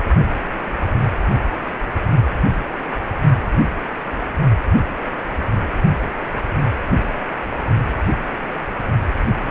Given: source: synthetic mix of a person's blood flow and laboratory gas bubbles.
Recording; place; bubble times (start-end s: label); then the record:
Doppler ultrasound of blood flow; precordium
9.44-9.51 s: bubbles
From the record:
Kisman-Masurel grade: 213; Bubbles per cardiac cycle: several, 3 to 8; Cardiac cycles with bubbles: 1 to 10%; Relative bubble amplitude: loud (0.450 to 0.775); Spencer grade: 1 (occasional bubble signal discernible with the cardiac motion signal, with majority of cardiac periods free of bubbles); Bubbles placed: only in the low amplitude regions of the cardiac cycle